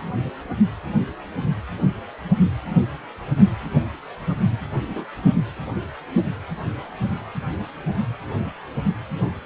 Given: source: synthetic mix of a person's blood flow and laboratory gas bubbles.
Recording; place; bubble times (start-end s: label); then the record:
Doppler ultrasound of blood flow; precordium
4.89-5.05 s: bubbles
From the record:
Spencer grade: 2 (many but less than half of the cardiac periods contain bubble signals, singularly or in groups); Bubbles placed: anywhere in the cardiac cycle